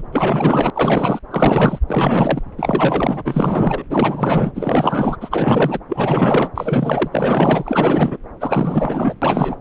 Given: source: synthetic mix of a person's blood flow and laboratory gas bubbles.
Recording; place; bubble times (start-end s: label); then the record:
Doppler ultrasound of blood flow; subclavian vein
0.00-0.02 s: bubbles
0.12-0.70 s: bubbles
0.74-1.19 s: bubbles
1.30-1.79 s: bubbles
1.88-2.42 s: bubbles
2.58-3.83 s: bubbles
3.90-4.52 s: bubbles
4.54-5.17 s: bubbles
5.21-5.80 s: bubbles
5.88-6.51 s: bubbles
6.54-7.08 s: bubbles
7.12-8.17 s: bubbles
8.40-9.14 s: bubbles
9.21-9.56 s: bubbles
From the record:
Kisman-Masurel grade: 444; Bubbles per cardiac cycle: continuous sound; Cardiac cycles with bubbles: 100%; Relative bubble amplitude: maximal (0.775 to 0.999); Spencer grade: 4 (maximum detectable bubble signal sounding continuously throughout systole and diastole of every cardiac period, and overriding the amplitude of the normal cardiac signals); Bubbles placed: anywhere in the cardiac cycle